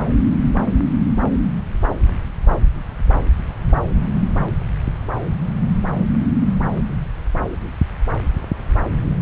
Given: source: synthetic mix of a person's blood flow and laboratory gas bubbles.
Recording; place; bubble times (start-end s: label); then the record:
Doppler ultrasound of blood flow; subclavian vein
no bubbles
From the record:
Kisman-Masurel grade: 000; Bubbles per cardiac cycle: 0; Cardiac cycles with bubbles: 0%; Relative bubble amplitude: no bubbles discernible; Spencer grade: 0 (complete lack of bubble signals)